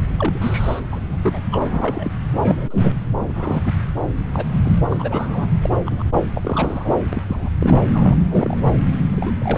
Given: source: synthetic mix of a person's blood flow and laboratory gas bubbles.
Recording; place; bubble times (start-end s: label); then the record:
Doppler ultrasound of blood flow; subclavian vein
0.18-0.80 s: bubbles
0.92-0.99 s: bubbles
1.11-1.18 s: bubbles
1.22-1.39 s: bubbles
1.51-2.11 s: bubbles
2.30-2.92 s: bubbles
3.19-3.61 s: bubbles
3.65-3.73 s: bubbles
4.33-4.45 s: bubbles
4.65-4.80 s: bubbles
4.90-5.47 s: bubbles
5.62-5.76 s: bubbles
5.86-6.08 s: bubbles
6.35-6.94 s: bubbles
7.12-7.25 s: bubbles
7.28-7.50 s: bubbles
7.58-7.89 s: bubbles
7.93-8.15 s: bubbles
8.29-8.57 s: bubbles
9.11-9.32 s: bubbles
9.38-9.58 s: bubbles
From the record:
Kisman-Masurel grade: 242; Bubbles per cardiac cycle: several, 3 to 8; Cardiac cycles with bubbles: 100%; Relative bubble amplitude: moderate (0.250 to 0.450); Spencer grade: 3 (all of the cardiac periods contain showers or single bubble signals, but not dominating or overriding the cardiac motion signals); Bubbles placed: anywhere in the cardiac cycle